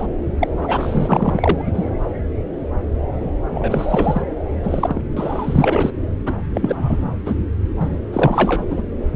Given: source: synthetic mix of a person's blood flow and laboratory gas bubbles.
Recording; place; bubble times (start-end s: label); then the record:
Doppler ultrasound of blood flow; subclavian vein
0.00-0.07 s: bubbles
0.39-0.48 s: bubbles
0.60-1.91 s: bubbles
3.48-4.22 s: bubbles
4.63-5.01 s: bubbles
5.17-5.92 s: bubbles
6.25-6.37 s: bubbles
6.54-7.16 s: bubbles
7.26-7.35 s: bubbles
7.80-7.99 s: bubbles
8.12-8.64 s: bubbles
8.70-8.82 s: bubbles
From the record:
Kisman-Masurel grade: 333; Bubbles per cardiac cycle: rolling drumbeat, 9 or more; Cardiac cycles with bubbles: 50 to 99%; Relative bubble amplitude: loud (0.450 to 0.775); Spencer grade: 3 (all of the cardiac periods contain showers or single bubble signals, but not dominating or overriding the cardiac motion signals); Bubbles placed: anywhere in the cardiac cycle